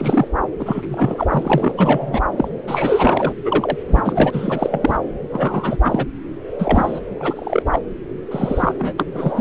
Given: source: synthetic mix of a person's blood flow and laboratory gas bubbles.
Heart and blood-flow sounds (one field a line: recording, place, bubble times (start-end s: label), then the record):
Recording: Doppler ultrasound of blood flow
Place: subclavian vein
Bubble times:
0.00-0.28 s: bubbles
0.58-1.26 s: bubbles
1.29-2.20 s: bubbles
2.36-2.48 s: bubbles
2.67-3.33 s: bubbles
3.45-3.77 s: bubbles
3.88-4.01 s: bubbles
4.05-4.99 s: bubbles
5.32-5.78 s: bubbles
5.84-6.07 s: bubbles
6.58-7.00 s: bubbles
7.19-7.62 s: bubbles
7.71-7.79 s: bubbles
8.31-8.74 s: bubbles
8.79-8.94 s: bubbles
8.97-9.04 s: bubbles
9.15-9.41 s: bubbles
From the record:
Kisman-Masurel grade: 343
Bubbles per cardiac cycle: rolling drumbeat, 9 or more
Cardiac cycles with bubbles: 100%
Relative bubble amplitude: loud (0.450 to 0.775)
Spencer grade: 3 (all of the cardiac periods contain showers or single bubble signals, but not dominating or overriding the cardiac motion signals)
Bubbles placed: anywhere in the cardiac cycle